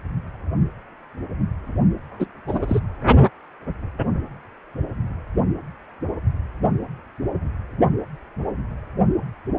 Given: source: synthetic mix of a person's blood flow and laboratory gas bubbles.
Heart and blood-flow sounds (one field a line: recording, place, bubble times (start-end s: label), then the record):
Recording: Doppler ultrasound of blood flow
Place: precordium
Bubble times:
2.19-2.27 s: bubbles
2.47-2.80 s: bubbles
From the record:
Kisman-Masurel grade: 212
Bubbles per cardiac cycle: several, 3 to 8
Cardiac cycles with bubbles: 1 to 10%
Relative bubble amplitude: moderate (0.250 to 0.450)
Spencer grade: 1 (occasional bubble signal discernible with the cardiac motion signal, with majority of cardiac periods free of bubbles)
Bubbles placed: only in the low amplitude regions of the cardiac cycle